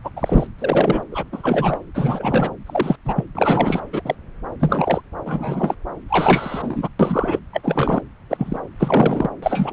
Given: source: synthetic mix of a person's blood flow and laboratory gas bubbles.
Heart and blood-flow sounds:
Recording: Doppler ultrasound of blood flow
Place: subclavian vein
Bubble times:
0.03-0.10 s: bubbles
0.16-0.47 s: bubbles
0.58-1.02 s: bubbles
1.11-1.23 s: bubbles
1.32-1.79 s: bubbles
1.94-2.52 s: bubbles
2.66-2.96 s: bubbles
3.05-3.25 s: bubbles
3.35-3.80 s: bubbles
3.92-4.01 s: bubbles
4.04-4.15 s: bubbles
4.59-5.01 s: bubbles
5.25-5.75 s: bubbles
6.08-6.88 s: bubbles
6.99-7.39 s: bubbles
7.53-8.01 s: bubbles
8.30-8.60 s: bubbles
8.79-9.29 s: bubbles
9.42-9.73 s: bubbles
From the record:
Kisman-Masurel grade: 243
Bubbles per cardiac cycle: several, 3 to 8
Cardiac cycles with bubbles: 100%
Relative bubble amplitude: loud (0.450 to 0.775)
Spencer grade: 3 (all of the cardiac periods contain showers or single bubble signals, but not dominating or overriding the cardiac motion signals)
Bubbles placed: anywhere in the cardiac cycle

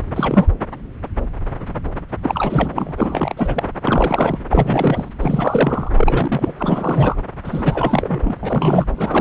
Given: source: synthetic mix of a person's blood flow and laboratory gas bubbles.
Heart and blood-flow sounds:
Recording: Doppler ultrasound of blood flow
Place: subclavian vein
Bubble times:
0.00-0.04 s: bubbles
0.16-0.48 s: bubbles
2.23-2.94 s: bubbles
2.97-3.63 s: bubbles
3.83-4.39 s: bubbles
4.50-5.09 s: bubbles
5.20-5.91 s: bubbles
5.95-6.52 s: bubbles
6.59-7.16 s: bubbles
7.45-8.35 s: bubbles
8.43-8.85 s: bubbles
8.96-9.21 s: bubbles
From the record:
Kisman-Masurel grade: 332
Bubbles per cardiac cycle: rolling drumbeat, 9 or more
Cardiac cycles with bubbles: 50 to 99%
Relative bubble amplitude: moderate (0.250 to 0.450)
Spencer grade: 3 (all of the cardiac periods contain showers or single bubble signals, but not dominating or overriding the cardiac motion signals)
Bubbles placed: anywhere in the cardiac cycle

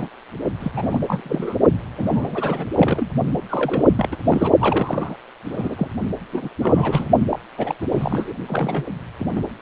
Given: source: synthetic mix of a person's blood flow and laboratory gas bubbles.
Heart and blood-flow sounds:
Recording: Doppler ultrasound of blood flow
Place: precordium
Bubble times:
0.00-0.09 s: bubbles
0.59-1.01 s: bubbles
1.07-1.58 s: bubbles
1.97-2.67 s: bubbles
2.77-3.08 s: bubbles
3.48-3.83 s: bubbles
3.96-4.08 s: bubbles
4.11-4.16 s: bubbles
4.24-4.52 s: bubbles
4.60-5.16 s: bubbles
5.45-5.88 s: bubbles
6.32-6.49 s: bubbles
6.62-7.06 s: bubbles
7.31-7.39 s: bubbles
7.58-7.75 s: bubbles
7.81-7.87 s: bubbles
7.92-8.33 s: bubbles
8.48-8.87 s: bubbles
9.19-9.44 s: bubbles
From the record:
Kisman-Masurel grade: 342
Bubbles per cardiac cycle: rolling drumbeat, 9 or more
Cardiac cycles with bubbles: 100%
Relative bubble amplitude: moderate (0.250 to 0.450)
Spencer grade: 3 (all of the cardiac periods contain showers or single bubble signals, but not dominating or overriding the cardiac motion signals)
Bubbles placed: only in the low amplitude regions of the cardiac cycle

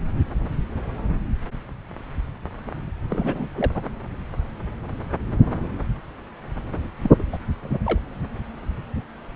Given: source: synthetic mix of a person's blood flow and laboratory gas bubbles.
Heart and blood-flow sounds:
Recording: Doppler ultrasound of blood flow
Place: subclavian vein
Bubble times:
3.10-3.48 s: bubbles
3.56-3.71 s: bubbles
3.75-3.82 s: bubbles
7.03-7.11 s: bubbles
7.18-7.22 s: bubbles
7.32-7.38 s: bubbles
7.62-7.79 s: bubbles
7.86-7.98 s: bubbles
From the record:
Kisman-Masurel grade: 222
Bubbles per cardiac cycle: several, 3 to 8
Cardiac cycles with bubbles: 10 to 50%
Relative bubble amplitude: moderate (0.250 to 0.450)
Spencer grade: 2 (many but less than half of the cardiac periods contain bubble signals, singularly or in groups)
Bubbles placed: anywhere in the cardiac cycle

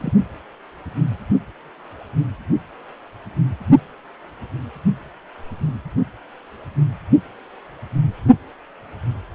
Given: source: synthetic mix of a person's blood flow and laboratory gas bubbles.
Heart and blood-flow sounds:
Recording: Doppler ultrasound of blood flow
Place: precordium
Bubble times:
0.00-0.13 s: bubbles
From the record:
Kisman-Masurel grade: 222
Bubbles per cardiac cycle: several, 3 to 8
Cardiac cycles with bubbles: 10 to 50%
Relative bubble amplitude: moderate (0.250 to 0.450)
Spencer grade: 2 (many but less than half of the cardiac periods contain bubble signals, singularly or in groups)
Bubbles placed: only in the low amplitude regions of the cardiac cycle

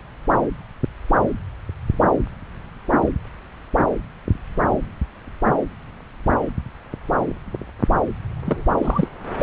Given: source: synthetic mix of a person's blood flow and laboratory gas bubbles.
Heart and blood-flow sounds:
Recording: Doppler ultrasound of blood flow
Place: subclavian vein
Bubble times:
8.46-8.63 s: bubbles
8.78-9.08 s: bubbles
9.40-9.43 s: bubbles
From the record:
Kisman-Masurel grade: 212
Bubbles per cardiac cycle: several, 3 to 8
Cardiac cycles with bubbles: 1 to 10%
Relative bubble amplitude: moderate (0.250 to 0.450)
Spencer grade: 1 (occasional bubble signal discernible with the cardiac motion signal, with majority of cardiac periods free of bubbles)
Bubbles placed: anywhere in the cardiac cycle

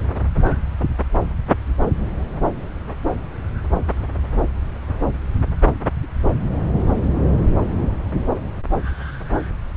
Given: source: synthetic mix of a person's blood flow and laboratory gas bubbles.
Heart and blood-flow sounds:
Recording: Doppler ultrasound of blood flow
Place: subclavian vein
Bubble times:
no bubbles
From the record:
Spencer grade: 0 (complete lack of bubble signals)

